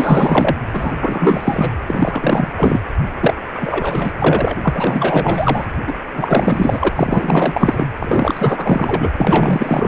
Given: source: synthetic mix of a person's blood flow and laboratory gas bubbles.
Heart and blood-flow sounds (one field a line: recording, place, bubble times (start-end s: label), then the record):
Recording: Doppler ultrasound of blood flow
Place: precordium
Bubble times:
0.00-0.57 s: bubbles
0.72-0.92 s: bubbles
0.99-1.72 s: bubbles
1.88-2.48 s: bubbles
2.56-2.80 s: bubbles
3.21-3.34 s: bubbles
3.53-4.12 s: bubbles
4.18-4.53 s: bubbles
4.62-5.65 s: bubbles
5.86-5.93 s: bubbles
6.13-6.89 s: bubbles
6.96-7.87 s: bubbles
8.00-9.10 s: bubbles
9.18-9.87 s: bubbles
From the record:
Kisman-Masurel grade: 444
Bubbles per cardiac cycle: continuous sound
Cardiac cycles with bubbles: 100%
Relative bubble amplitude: maximal (0.775 to 0.999)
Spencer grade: 4 (maximum detectable bubble signal sounding continuously throughout systole and diastole of every cardiac period, and overriding the amplitude of the normal cardiac signals)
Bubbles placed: anywhere in the cardiac cycle